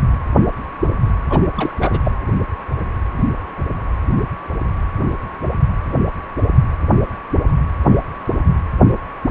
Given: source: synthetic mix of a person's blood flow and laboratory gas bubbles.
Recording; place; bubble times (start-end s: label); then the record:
Doppler ultrasound of blood flow; precordium
1.29-1.40 s: bubbles
1.55-1.72 s: bubbles
1.80-1.99 s: bubbles
2.04-2.11 s: bubbles
From the record:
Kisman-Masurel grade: 212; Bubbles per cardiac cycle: several, 3 to 8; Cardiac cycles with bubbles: 1 to 10%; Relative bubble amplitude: moderate (0.250 to 0.450); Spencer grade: 1 (occasional bubble signal discernible with the cardiac motion signal, with majority of cardiac periods free of bubbles); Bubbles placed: anywhere in the cardiac cycle